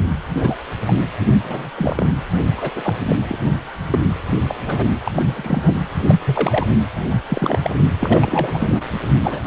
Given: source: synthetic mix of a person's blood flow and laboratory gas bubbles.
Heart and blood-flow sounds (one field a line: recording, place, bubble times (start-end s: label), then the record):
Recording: Doppler ultrasound of blood flow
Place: precordium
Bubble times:
0.39-0.57 s: bubbles
0.87-0.95 s: bubbles
1.44-1.70 s: bubbles
1.76-2.07 s: bubbles
2.57-2.71 s: bubbles
2.75-2.95 s: bubbles
3.08-3.16 s: bubbles
3.29-3.37 s: bubbles
3.90-3.99 s: bubbles
4.48-4.55 s: bubbles
4.66-4.87 s: bubbles
5.04-5.12 s: bubbles
5.15-5.23 s: bubbles
5.27-5.74 s: bubbles
6.08-6.16 s: bubbles
6.25-6.66 s: bubbles
7.29-7.59 s: bubbles
7.64-7.77 s: bubbles
7.99-8.80 s: bubbles
9.22-9.47 s: bubbles
From the record:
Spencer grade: 3 (all of the cardiac periods contain showers or single bubble signals, but not dominating or overriding the cardiac motion signals)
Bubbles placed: anywhere in the cardiac cycle